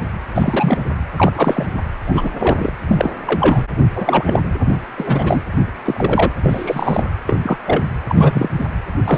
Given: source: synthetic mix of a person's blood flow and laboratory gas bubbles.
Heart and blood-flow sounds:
Doppler ultrasound of blood flow; precordium
0.35-0.79 s: bubbles
1.16-1.32 s: bubbles
1.35-1.67 s: bubbles
2.06-2.30 s: bubbles
2.40-2.74 s: bubbles
2.89-3.11 s: bubbles
3.27-3.65 s: bubbles
3.95-4.39 s: bubbles
4.97-5.44 s: bubbles
5.84-6.31 s: bubbles
6.42-7.10 s: bubbles
7.28-7.57 s: bubbles
7.66-7.83 s: bubbles
8.09-8.49 s: bubbles
8.59-8.65 s: bubbles
9.06-9.17 s: bubbles
From the record:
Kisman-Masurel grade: 243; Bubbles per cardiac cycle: several, 3 to 8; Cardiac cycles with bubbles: 100%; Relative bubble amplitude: loud (0.450 to 0.775); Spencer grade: 3 (all of the cardiac periods contain showers or single bubble signals, but not dominating or overriding the cardiac motion signals); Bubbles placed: anywhere in the cardiac cycle

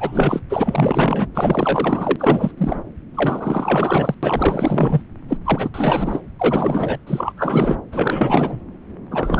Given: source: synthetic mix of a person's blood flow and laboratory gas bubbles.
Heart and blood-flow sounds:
Doppler ultrasound of blood flow; subclavian vein
0.00-0.40 s: bubbles
0.49-1.27 s: bubbles
1.34-2.16 s: bubbles
2.19-2.51 s: bubbles
2.58-2.81 s: bubbles
3.14-4.14 s: bubbles
4.22-5.01 s: bubbles
5.28-5.37 s: bubbles
5.44-5.70 s: bubbles
5.74-6.21 s: bubbles
6.39-6.98 s: bubbles
7.06-7.33 s: bubbles
7.36-7.76 s: bubbles
7.92-8.60 s: bubbles
9.11-9.40 s: bubbles
From the record:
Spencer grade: 4 (maximum detectable bubble signal sounding continuously throughout systole and diastole of every cardiac period, and overriding the amplitude of the normal cardiac signals); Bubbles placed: anywhere in the cardiac cycle

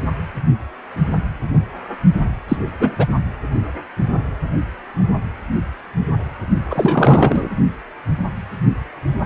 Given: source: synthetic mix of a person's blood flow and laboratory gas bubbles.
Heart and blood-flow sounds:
Doppler ultrasound of blood flow; precordium
2.48-2.56 s: bubbles
2.79-2.96 s: bubbles
2.98-3.06 s: bubbles
6.70-7.49 s: bubbles
From the record:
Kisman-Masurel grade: 223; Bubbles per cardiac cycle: several, 3 to 8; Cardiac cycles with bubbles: 10 to 50%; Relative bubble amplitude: loud (0.450 to 0.775); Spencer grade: 2 (many but less than half of the cardiac periods contain bubble signals, singularly or in groups); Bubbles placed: anywhere in the cardiac cycle

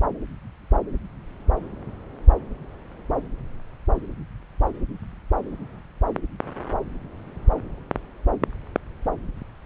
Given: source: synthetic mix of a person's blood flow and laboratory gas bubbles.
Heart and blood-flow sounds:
Doppler ultrasound of blood flow; subclavian vein
no bubbles
From the record:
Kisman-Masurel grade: 000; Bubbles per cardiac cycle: 0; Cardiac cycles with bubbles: 0%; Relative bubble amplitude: no bubbles discernible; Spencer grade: 0 (complete lack of bubble signals)

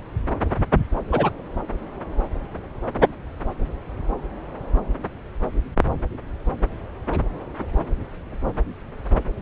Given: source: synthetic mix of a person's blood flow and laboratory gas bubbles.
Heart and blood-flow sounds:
Doppler ultrasound of blood flow; subclavian vein
1.12-1.30 s: bubbles
From the record:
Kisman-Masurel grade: 112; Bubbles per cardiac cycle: 1 to 2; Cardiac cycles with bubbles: 1 to 10%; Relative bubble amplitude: moderate (0.250 to 0.450); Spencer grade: 1 (occasional bubble signal discernible with the cardiac motion signal, with majority of cardiac periods free of bubbles); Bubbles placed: anywhere in the cardiac cycle

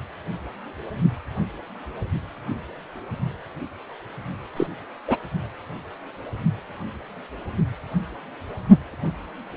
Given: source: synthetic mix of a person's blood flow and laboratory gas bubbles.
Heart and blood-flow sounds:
Doppler ultrasound of blood flow; precordium
4.56-4.67 s: bubbles
5.07-5.17 s: bubbles
From the record:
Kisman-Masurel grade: 222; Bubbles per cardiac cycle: several, 3 to 8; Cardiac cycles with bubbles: 10 to 50%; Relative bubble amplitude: moderate (0.250 to 0.450); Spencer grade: 2 (many but less than half of the cardiac periods contain bubble signals, singularly or in groups); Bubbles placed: only in the low amplitude regions of the cardiac cycle

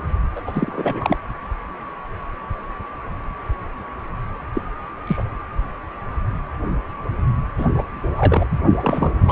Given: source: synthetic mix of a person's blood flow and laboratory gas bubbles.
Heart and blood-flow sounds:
Doppler ultrasound of blood flow; precordium
0.35-0.42 s: bubbles
0.46-1.17 s: bubbles
4.53-4.62 s: bubbles
5.07-5.23 s: bubbles
7.57-7.67 s: bubbles
7.74-7.84 s: bubbles
7.96-8.46 s: bubbles
8.51-8.58 s: bubbles
8.80-9.32 s: bubbles
From the record:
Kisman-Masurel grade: 223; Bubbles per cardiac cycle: several, 3 to 8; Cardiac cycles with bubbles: 10 to 50%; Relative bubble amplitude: loud (0.450 to 0.775); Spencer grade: 2 (many but less than half of the cardiac periods contain bubble signals, singularly or in groups); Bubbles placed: anywhere in the cardiac cycle

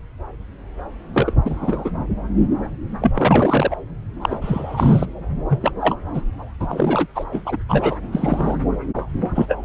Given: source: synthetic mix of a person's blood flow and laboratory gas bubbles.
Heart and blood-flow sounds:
Doppler ultrasound of blood flow; subclavian vein
1.14-1.32 s: bubbles
1.44-1.91 s: bubbles
3.01-3.12 s: bubbles
3.15-3.76 s: bubbles
4.21-5.06 s: bubbles
5.49-5.72 s: bubbles
5.80-5.96 s: bubbles
6.13-6.21 s: bubbles
6.60-7.07 s: bubbles
7.14-7.25 s: bubbles
7.32-7.56 s: bubbles
7.69-7.98 s: bubbles
8.12-8.57 s: bubbles
9.34-9.46 s: bubbles
9.48-9.65 s: bubbles
From the record:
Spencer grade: 3 (all of the cardiac periods contain showers or single bubble signals, but not dominating or overriding the cardiac motion signals); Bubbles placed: anywhere in the cardiac cycle

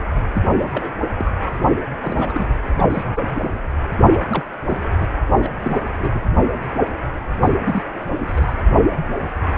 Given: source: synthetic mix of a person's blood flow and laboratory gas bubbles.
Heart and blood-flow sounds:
Doppler ultrasound of blood flow; precordium
0.33-0.42 s: bubbles
0.59-0.69 s: bubbles
0.72-0.92 s: bubbles
1.19-1.30 s: bubbles
2.00-2.47 s: bubbles
2.77-2.85 s: bubbles
2.90-3.02 s: bubbles
3.05-3.27 s: bubbles
3.34-3.59 s: bubbles
4.10-4.21 s: bubbles
4.29-4.44 s: bubbles
4.69-4.78 s: bubbles
4.83-4.90 s: bubbles
5.00-5.07 s: bubbles
5.14-5.16 s: bubbles
5.33-5.49 s: bubbles
5.60-5.82 s: bubbles
5.98-6.10 s: bubbles
6.14-6.22 s: bubbles
7.41-7.49 s: bubbles
7.65-7.83 s: bubbles
8.18-8.54 s: bubbles
From the record:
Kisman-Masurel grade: 232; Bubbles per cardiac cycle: several, 3 to 8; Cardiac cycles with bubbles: 50 to 99%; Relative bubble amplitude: moderate (0.250 to 0.450); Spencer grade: 3 (all of the cardiac periods contain showers or single bubble signals, but not dominating or overriding the cardiac motion signals); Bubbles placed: anywhere in the cardiac cycle

